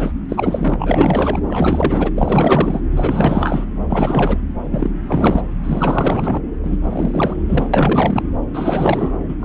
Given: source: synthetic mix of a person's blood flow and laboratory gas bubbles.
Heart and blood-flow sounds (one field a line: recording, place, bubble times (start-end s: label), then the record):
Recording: Doppler ultrasound of blood flow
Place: subclavian vein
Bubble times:
0.00-0.14 s: bubbles
0.29-0.76 s: bubbles
0.79-1.42 s: bubbles
1.47-2.11 s: bubbles
2.16-2.80 s: bubbles
2.92-3.64 s: bubbles
3.89-4.38 s: bubbles
4.71-4.90 s: bubbles
5.07-5.42 s: bubbles
5.63-6.42 s: bubbles
6.62-6.77 s: bubbles
6.83-7.67 s: bubbles
7.73-8.29 s: bubbles
8.54-9.15 s: bubbles
9.28-9.36 s: bubbles
9.40-9.45 s: bubbles
From the record:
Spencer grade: 4 (maximum detectable bubble signal sounding continuously throughout systole and diastole of every cardiac period, and overriding the amplitude of the normal cardiac signals)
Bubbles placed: anywhere in the cardiac cycle